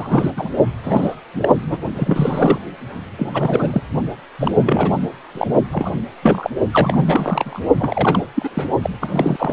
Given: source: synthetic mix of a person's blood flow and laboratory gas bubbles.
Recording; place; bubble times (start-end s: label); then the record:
Doppler ultrasound of blood flow; precordium
0.00-0.30 s: bubbles
0.36-0.49 s: bubbles
0.83-1.15 s: bubbles
1.33-1.55 s: bubbles
1.67-1.77 s: bubbles
1.94-2.60 s: bubbles
3.18-3.31 s: bubbles
3.33-3.84 s: bubbles
4.38-4.51 s: bubbles
4.55-4.61 s: bubbles
4.64-4.99 s: bubbles
5.35-5.47 s: bubbles
5.71-5.91 s: bubbles
6.22-6.50 s: bubbles
6.72-7.61 s: bubbles
7.79-8.28 s: bubbles
8.35-8.68 s: bubbles
8.82-8.89 s: bubbles
9.01-9.53 s: bubbles
From the record:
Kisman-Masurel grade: 332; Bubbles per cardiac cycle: rolling drumbeat, 9 or more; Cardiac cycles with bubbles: 50 to 99%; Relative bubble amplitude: moderate (0.250 to 0.450); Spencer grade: 3 (all of the cardiac periods contain showers or single bubble signals, but not dominating or overriding the cardiac motion signals); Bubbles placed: only in the low amplitude regions of the cardiac cycle